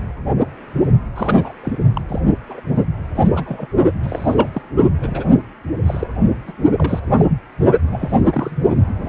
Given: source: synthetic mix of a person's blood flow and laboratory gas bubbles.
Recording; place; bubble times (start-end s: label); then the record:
Doppler ultrasound of blood flow; precordium
1.15-1.53 s: bubbles
1.64-1.73 s: bubbles
1.94-2.02 s: bubbles
2.08-2.21 s: bubbles
2.48-2.60 s: bubbles
3.16-3.44 s: bubbles
3.46-3.67 s: bubbles
4.03-4.48 s: bubbles
4.53-4.61 s: bubbles
5.02-5.24 s: bubbles
5.86-6.07 s: bubbles
6.47-6.53 s: bubbles
6.72-6.99 s: bubbles
7.06-7.12 s: bubbles
7.15-7.25 s: bubbles
7.92-8.21 s: bubbles
8.32-8.57 s: bubbles
8.97-9.08 s: bubbles
From the record:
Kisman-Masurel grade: 232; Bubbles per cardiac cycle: several, 3 to 8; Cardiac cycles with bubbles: 50 to 99%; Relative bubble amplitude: moderate (0.250 to 0.450); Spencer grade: 3 (all of the cardiac periods contain showers or single bubble signals, but not dominating or overriding the cardiac motion signals); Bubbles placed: only in the low amplitude regions of the cardiac cycle